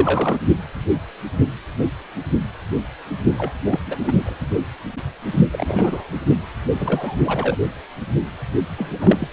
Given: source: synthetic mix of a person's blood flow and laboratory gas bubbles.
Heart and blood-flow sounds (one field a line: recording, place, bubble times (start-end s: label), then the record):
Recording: Doppler ultrasound of blood flow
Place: precordium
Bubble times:
0.00-0.38 s: bubbles
3.38-3.52 s: bubbles
3.65-3.80 s: bubbles
3.86-3.98 s: bubbles
4.01-4.13 s: bubbles
4.18-4.35 s: bubbles
5.52-6.04 s: bubbles
6.72-7.58 s: bubbles
8.78-8.90 s: bubbles
8.93-9.28 s: bubbles
From the record:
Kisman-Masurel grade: 332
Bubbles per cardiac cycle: rolling drumbeat, 9 or more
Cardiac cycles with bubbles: 50 to 99%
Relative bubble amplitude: moderate (0.250 to 0.450)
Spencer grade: 3 (all of the cardiac periods contain showers or single bubble signals, but not dominating or overriding the cardiac motion signals)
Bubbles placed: only in the low amplitude regions of the cardiac cycle